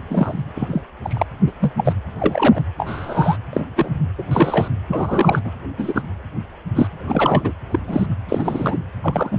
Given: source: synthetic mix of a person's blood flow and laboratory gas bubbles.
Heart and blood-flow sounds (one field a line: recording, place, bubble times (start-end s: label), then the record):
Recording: Doppler ultrasound of blood flow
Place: precordium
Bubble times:
0.00-0.03 s: bubbles
0.10-0.42 s: bubbles
0.54-0.81 s: bubbles
1.03-1.25 s: bubbles
1.47-1.52 s: bubbles
1.60-1.74 s: bubbles
1.77-1.93 s: bubbles
2.18-2.63 s: bubbles
2.77-3.37 s: bubbles
3.53-3.66 s: bubbles
3.76-3.90 s: bubbles
4.17-4.23 s: bubbles
4.31-4.68 s: bubbles
4.88-5.42 s: bubbles
5.44-5.51 s: bubbles
5.78-6.01 s: bubbles
6.75-6.88 s: bubbles
7.00-7.52 s: bubbles
7.71-7.79 s: bubbles
7.86-8.06 s: bubbles
8.29-8.78 s: bubbles
9.02-9.39 s: bubbles
From the record:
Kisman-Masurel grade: 243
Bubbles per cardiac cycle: several, 3 to 8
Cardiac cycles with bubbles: 100%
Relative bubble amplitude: loud (0.450 to 0.775)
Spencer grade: 3 (all of the cardiac periods contain showers or single bubble signals, but not dominating or overriding the cardiac motion signals)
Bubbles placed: anywhere in the cardiac cycle